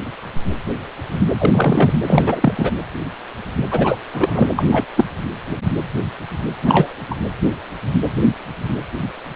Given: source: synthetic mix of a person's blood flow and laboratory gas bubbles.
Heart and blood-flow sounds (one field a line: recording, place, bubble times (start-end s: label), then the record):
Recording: Doppler ultrasound of blood flow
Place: precordium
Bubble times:
1.38-1.93 s: bubbles
2.06-2.71 s: bubbles
3.71-3.99 s: bubbles
4.13-4.49 s: bubbles
4.58-4.65 s: bubbles
4.71-4.85 s: bubbles
4.96-5.04 s: bubbles
6.62-6.95 s: bubbles
7.11-7.15 s: bubbles
From the record:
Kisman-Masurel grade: 223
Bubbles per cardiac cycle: several, 3 to 8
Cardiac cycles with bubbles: 10 to 50%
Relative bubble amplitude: loud (0.450 to 0.775)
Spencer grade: 2 (many but less than half of the cardiac periods contain bubble signals, singularly or in groups)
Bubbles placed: anywhere in the cardiac cycle